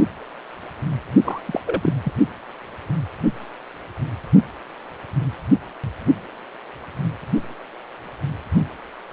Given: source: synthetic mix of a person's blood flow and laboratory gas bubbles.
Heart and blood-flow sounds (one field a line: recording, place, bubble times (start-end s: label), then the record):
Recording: Doppler ultrasound of blood flow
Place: precordium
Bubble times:
1.24-1.40 s: bubbles
1.45-1.60 s: bubbles
1.66-1.93 s: bubbles
2.04-2.13 s: bubbles
From the record:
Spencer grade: 1 (occasional bubble signal discernible with the cardiac motion signal, with majority of cardiac periods free of bubbles)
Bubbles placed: only in the low amplitude regions of the cardiac cycle